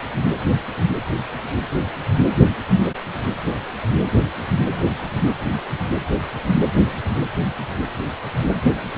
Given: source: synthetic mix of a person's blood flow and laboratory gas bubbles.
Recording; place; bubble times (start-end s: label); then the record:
Doppler ultrasound of blood flow; precordium
2.17-2.25 s: bubbles
From the record:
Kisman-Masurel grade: 111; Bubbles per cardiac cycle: 1 to 2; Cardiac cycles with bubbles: 1 to 10%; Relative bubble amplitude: barely perceptible (0.100 to 0.250); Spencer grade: 1 (occasional bubble signal discernible with the cardiac motion signal, with majority of cardiac periods free of bubbles); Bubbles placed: anywhere in the cardiac cycle